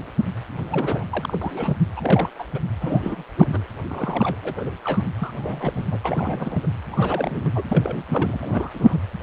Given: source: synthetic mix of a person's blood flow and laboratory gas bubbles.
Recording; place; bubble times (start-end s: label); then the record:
Doppler ultrasound of blood flow; precordium
0.70-1.04 s: bubbles
1.10-1.39 s: bubbles
1.41-1.77 s: bubbles
1.96-2.29 s: bubbles
2.39-2.44 s: bubbles
2.54-2.60 s: bubbles
2.81-3.23 s: bubbles
3.37-3.67 s: bubbles
3.88-4.71 s: bubbles
4.84-5.07 s: bubbles
5.15-5.85 s: bubbles
5.91-5.99 s: bubbles
6.03-6.67 s: bubbles
6.91-7.62 s: bubbles
7.68-8.04 s: bubbles
8.08-8.39 s: bubbles
8.42-8.70 s: bubbles
8.74-8.97 s: bubbles
From the record:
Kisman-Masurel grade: 342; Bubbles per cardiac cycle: rolling drumbeat, 9 or more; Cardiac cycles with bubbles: 100%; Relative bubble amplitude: moderate (0.250 to 0.450); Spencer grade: 3 (all of the cardiac periods contain showers or single bubble signals, but not dominating or overriding the cardiac motion signals); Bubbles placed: anywhere in the cardiac cycle